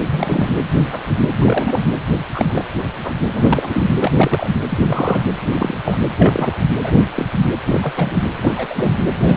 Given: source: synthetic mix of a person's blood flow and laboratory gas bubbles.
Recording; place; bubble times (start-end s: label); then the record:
Doppler ultrasound of blood flow; precordium
0.11-0.52 s: bubbles
0.78-1.02 s: bubbles
1.20-1.33 s: bubbles
1.39-1.89 s: bubbles
2.34-2.65 s: bubbles
3.02-3.13 s: bubbles
3.33-3.89 s: bubbles
4.00-4.12 s: bubbles
4.16-4.50 s: bubbles
4.69-4.78 s: bubbles
4.81-5.21 s: bubbles
5.51-5.77 s: bubbles
5.84-5.97 s: bubbles
6.18-6.55 s: bubbles
6.82-7.05 s: bubbles
7.16-7.27 s: bubbles
7.31-7.46 s: bubbles
7.66-8.23 s: bubbles
8.36-8.66 s: bubbles
8.69-8.94 s: bubbles
9.15-9.37 s: bubbles
From the record:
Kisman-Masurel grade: 242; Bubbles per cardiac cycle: several, 3 to 8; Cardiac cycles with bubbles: 100%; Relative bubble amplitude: moderate (0.250 to 0.450); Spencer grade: 3 (all of the cardiac periods contain showers or single bubble signals, but not dominating or overriding the cardiac motion signals); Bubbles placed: anywhere in the cardiac cycle